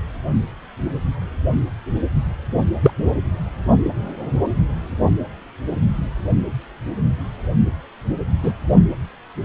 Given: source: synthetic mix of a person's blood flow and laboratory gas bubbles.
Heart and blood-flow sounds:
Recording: Doppler ultrasound of blood flow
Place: precordium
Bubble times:
2.83-2.93 s: bubbles
8.43-8.53 s: bubbles
8.73-8.85 s: bubbles
From the record:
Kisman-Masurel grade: 123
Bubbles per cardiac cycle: 1 to 2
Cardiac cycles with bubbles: 10 to 50%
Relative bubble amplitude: loud (0.450 to 0.775)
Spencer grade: 2 (many but less than half of the cardiac periods contain bubble signals, singularly or in groups)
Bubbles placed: anywhere in the cardiac cycle

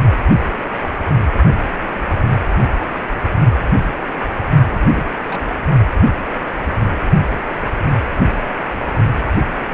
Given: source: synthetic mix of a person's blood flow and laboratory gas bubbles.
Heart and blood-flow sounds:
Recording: Doppler ultrasound of blood flow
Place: precordium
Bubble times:
4.71-4.79 s: bubbles
4.94-5.06 s: bubbles
5.24-5.39 s: bubbles
From the record:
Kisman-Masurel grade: 221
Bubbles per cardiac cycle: several, 3 to 8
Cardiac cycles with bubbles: 10 to 50%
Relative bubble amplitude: barely perceptible (0.100 to 0.250)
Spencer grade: 2 (many but less than half of the cardiac periods contain bubble signals, singularly or in groups)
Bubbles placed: only in the low amplitude regions of the cardiac cycle

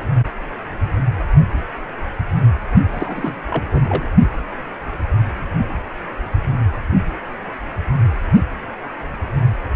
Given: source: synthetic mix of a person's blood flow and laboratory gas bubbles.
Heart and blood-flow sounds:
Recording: Doppler ultrasound of blood flow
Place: precordium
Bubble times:
2.92-3.36 s: bubbles
3.49-4.10 s: bubbles
From the record:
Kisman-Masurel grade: 212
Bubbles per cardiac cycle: several, 3 to 8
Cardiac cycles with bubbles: 1 to 10%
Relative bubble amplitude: moderate (0.250 to 0.450)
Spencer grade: 1 (occasional bubble signal discernible with the cardiac motion signal, with majority of cardiac periods free of bubbles)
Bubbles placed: anywhere in the cardiac cycle

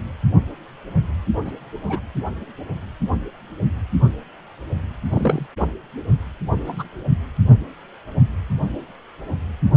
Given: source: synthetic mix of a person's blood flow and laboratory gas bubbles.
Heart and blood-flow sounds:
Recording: Doppler ultrasound of blood flow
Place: precordium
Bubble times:
1.45-1.52 s: bubbles
1.86-1.99 s: bubbles
5.10-5.46 s: bubbles
6.67-6.83 s: bubbles
From the record:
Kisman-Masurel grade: 122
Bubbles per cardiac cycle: 1 to 2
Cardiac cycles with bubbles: 10 to 50%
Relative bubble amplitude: moderate (0.250 to 0.450)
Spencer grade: 2 (many but less than half of the cardiac periods contain bubble signals, singularly or in groups)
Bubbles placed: anywhere in the cardiac cycle

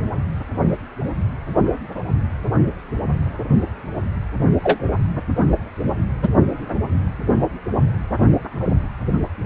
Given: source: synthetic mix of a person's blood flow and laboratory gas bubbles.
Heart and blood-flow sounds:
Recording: Doppler ultrasound of blood flow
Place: precordium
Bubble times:
4.63-4.79 s: bubbles
6.23-6.29 s: bubbles
From the record:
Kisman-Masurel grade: 123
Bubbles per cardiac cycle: 1 to 2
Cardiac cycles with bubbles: 10 to 50%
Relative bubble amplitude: loud (0.450 to 0.775)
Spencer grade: 2 (many but less than half of the cardiac periods contain bubble signals, singularly or in groups)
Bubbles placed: only in the low amplitude regions of the cardiac cycle

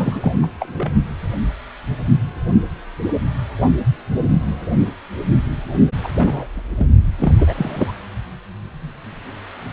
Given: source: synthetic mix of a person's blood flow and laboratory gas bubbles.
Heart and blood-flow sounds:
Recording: Doppler ultrasound of blood flow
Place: precordium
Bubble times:
0.00-0.34 s: bubbles
0.42-0.46 s: bubbles
0.60-0.93 s: bubbles
6.03-6.09 s: bubbles
6.17-6.46 s: bubbles
6.54-6.88 s: bubbles
7.17-7.35 s: bubbles
7.38-7.94 s: bubbles
From the record:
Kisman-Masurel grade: 222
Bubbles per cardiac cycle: several, 3 to 8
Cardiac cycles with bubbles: 10 to 50%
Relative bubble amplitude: moderate (0.250 to 0.450)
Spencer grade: 2 (many but less than half of the cardiac periods contain bubble signals, singularly or in groups)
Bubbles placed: only in the low amplitude regions of the cardiac cycle

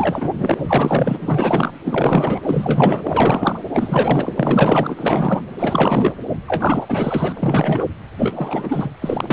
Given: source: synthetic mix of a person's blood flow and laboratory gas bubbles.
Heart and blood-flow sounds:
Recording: Doppler ultrasound of blood flow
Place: precordium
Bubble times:
0.00-1.73 s: bubbles
1.84-3.59 s: bubbles
3.73-4.33 s: bubbles
4.36-5.42 s: bubbles
5.58-6.13 s: bubbles
6.47-7.33 s: bubbles
7.37-7.86 s: bubbles
8.18-8.95 s: bubbles
9.01-9.33 s: bubbles
From the record:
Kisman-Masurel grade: 444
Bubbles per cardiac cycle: continuous sound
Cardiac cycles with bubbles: 100%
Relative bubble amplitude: maximal (0.775 to 0.999)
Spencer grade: 4 (maximum detectable bubble signal sounding continuously throughout systole and diastole of every cardiac period, and overriding the amplitude of the normal cardiac signals)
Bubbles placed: anywhere in the cardiac cycle

